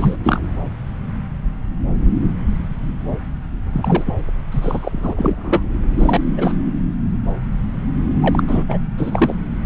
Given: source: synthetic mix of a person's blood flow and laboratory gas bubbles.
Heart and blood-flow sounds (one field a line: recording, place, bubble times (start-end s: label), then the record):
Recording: Doppler ultrasound of blood flow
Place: subclavian vein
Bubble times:
0.00-0.16 s: bubbles
0.23-0.41 s: bubbles
3.73-4.14 s: bubbles
4.51-5.13 s: bubbles
5.17-5.62 s: bubbles
5.98-6.21 s: bubbles
6.37-6.54 s: bubbles
8.21-8.43 s: bubbles
8.47-8.63 s: bubbles
8.68-8.78 s: bubbles
8.97-9.35 s: bubbles
9.63-9.66 s: bubbles
From the record:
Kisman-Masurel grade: 222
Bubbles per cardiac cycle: several, 3 to 8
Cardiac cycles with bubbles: 10 to 50%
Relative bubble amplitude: moderate (0.250 to 0.450)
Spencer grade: 2 (many but less than half of the cardiac periods contain bubble signals, singularly or in groups)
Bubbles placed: anywhere in the cardiac cycle